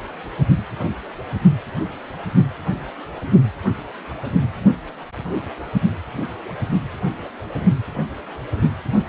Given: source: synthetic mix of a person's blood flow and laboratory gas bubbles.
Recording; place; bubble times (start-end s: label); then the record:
Doppler ultrasound of blood flow; precordium
no bubbles
From the record:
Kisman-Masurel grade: 000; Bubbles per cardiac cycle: 0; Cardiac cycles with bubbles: 0%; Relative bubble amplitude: no bubbles discernible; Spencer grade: 0 (complete lack of bubble signals)